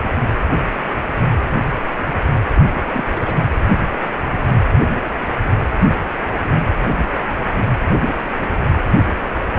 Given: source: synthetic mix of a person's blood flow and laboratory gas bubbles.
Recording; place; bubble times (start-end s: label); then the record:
Doppler ultrasound of blood flow; precordium
2.55-2.61 s: bubbles
2.74-2.79 s: bubbles
2.92-3.04 s: bubbles
3.12-3.35 s: bubbles
From the record:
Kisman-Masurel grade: 211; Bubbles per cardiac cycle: several, 3 to 8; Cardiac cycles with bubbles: 1 to 10%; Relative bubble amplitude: barely perceptible (0.100 to 0.250); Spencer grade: 1 (occasional bubble signal discernible with the cardiac motion signal, with majority of cardiac periods free of bubbles); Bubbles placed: anywhere in the cardiac cycle